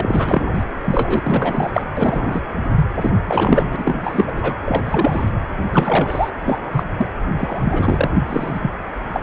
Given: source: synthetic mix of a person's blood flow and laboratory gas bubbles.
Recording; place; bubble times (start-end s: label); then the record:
Doppler ultrasound of blood flow; precordium
0.00-0.64 s: bubbles
0.84-1.71 s: bubbles
1.75-1.82 s: bubbles
1.95-2.42 s: bubbles
2.75-2.86 s: bubbles
3.00-3.10 s: bubbles
3.26-4.32 s: bubbles
4.35-4.58 s: bubbles
4.66-4.81 s: bubbles
4.85-5.29 s: bubbles
5.71-6.30 s: bubbles
6.45-6.58 s: bubbles
6.71-6.84 s: bubbles
6.97-7.06 s: bubbles
7.38-8.11 s: bubbles
8.26-8.72 s: bubbles
9.13-9.21 s: bubbles
From the record:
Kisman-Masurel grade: 343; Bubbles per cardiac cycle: rolling drumbeat, 9 or more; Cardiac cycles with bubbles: 100%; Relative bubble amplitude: loud (0.450 to 0.775); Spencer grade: 3 (all of the cardiac periods contain showers or single bubble signals, but not dominating or overriding the cardiac motion signals); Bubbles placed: anywhere in the cardiac cycle